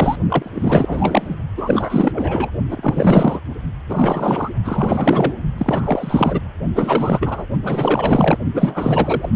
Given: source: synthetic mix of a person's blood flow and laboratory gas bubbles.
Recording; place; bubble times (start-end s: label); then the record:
Doppler ultrasound of blood flow; precordium
0.00-0.18 s: bubbles
0.29-1.36 s: bubbles
1.57-2.50 s: bubbles
2.71-3.40 s: bubbles
3.89-4.49 s: bubbles
4.64-5.33 s: bubbles
5.57-6.39 s: bubbles
6.74-7.46 s: bubbles
7.62-8.38 s: bubbles
8.54-9.29 s: bubbles
9.32-9.36 s: bubbles
From the record:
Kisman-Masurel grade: 444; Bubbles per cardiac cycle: continuous sound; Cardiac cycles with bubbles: 100%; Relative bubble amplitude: maximal (0.775 to 0.999); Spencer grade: 4 (maximum detectable bubble signal sounding continuously throughout systole and diastole of every cardiac period, and overriding the amplitude of the normal cardiac signals); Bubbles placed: only in the low amplitude regions of the cardiac cycle